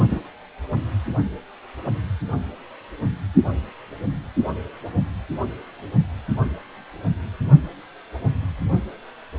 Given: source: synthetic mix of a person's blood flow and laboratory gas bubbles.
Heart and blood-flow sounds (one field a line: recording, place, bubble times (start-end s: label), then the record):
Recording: Doppler ultrasound of blood flow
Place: precordium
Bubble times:
0.10-0.19 s: bubbles
From the record:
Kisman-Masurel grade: 112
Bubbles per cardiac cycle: 1 to 2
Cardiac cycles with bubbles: 1 to 10%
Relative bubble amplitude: moderate (0.250 to 0.450)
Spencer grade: 1 (occasional bubble signal discernible with the cardiac motion signal, with majority of cardiac periods free of bubbles)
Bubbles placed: only in the low amplitude regions of the cardiac cycle